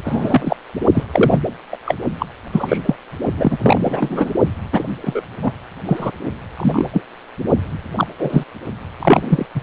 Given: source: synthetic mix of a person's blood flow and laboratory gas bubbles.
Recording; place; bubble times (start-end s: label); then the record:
Doppler ultrasound of blood flow; precordium
0.04-0.56 s: bubbles
0.93-1.03 s: bubbles
1.13-1.40 s: bubbles
1.72-1.77 s: bubbles
1.85-1.96 s: bubbles
2.19-2.27 s: bubbles
2.52-2.78 s: bubbles
2.85-2.95 s: bubbles
3.37-3.58 s: bubbles
3.62-4.30 s: bubbles
4.72-4.83 s: bubbles
5.01-5.26 s: bubbles
5.42-5.53 s: bubbles
5.86-6.12 s: bubbles
6.55-6.90 s: bubbles
6.92-7.02 s: bubbles
7.96-8.07 s: bubbles
8.19-8.44 s: bubbles
8.99-9.46 s: bubbles
9.54-9.61 s: bubbles
From the record:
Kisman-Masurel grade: 243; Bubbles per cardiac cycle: several, 3 to 8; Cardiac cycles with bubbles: 100%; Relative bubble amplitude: loud (0.450 to 0.775); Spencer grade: 3 (all of the cardiac periods contain showers or single bubble signals, but not dominating or overriding the cardiac motion signals); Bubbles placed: only in the low amplitude regions of the cardiac cycle